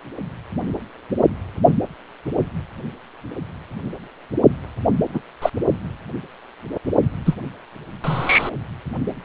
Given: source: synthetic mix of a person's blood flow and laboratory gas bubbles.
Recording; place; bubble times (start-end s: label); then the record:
Doppler ultrasound of blood flow; precordium
5.13-5.20 s: bubbles
5.42-5.50 s: bubbles
7.25-7.35 s: bubbles
8.04-8.50 s: bubbles
From the record:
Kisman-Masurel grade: 123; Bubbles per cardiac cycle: 1 to 2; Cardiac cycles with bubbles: 10 to 50%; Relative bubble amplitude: loud (0.450 to 0.775); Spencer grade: 2 (many but less than half of the cardiac periods contain bubble signals, singularly or in groups); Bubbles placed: only in the low amplitude regions of the cardiac cycle